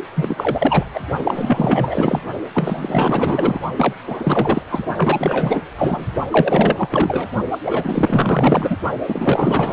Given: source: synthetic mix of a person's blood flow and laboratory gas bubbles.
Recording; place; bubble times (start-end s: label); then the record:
Doppler ultrasound of blood flow; precordium
0.15-0.85 s: bubbles
0.93-1.00 s: bubbles
1.17-2.21 s: bubbles
2.54-3.60 s: bubbles
3.77-3.93 s: bubbles
4.06-4.62 s: bubbles
4.70-4.85 s: bubbles
4.97-5.61 s: bubbles
5.76-6.06 s: bubbles
6.30-7.28 s: bubbles
7.51-7.58 s: bubbles
7.65-8.77 s: bubbles
9.07-9.73 s: bubbles
From the record:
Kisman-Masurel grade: 444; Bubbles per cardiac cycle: continuous sound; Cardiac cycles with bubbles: 100%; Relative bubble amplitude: maximal (0.775 to 0.999); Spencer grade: 4 (maximum detectable bubble signal sounding continuously throughout systole and diastole of every cardiac period, and overriding the amplitude of the normal cardiac signals); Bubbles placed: only in the low amplitude regions of the cardiac cycle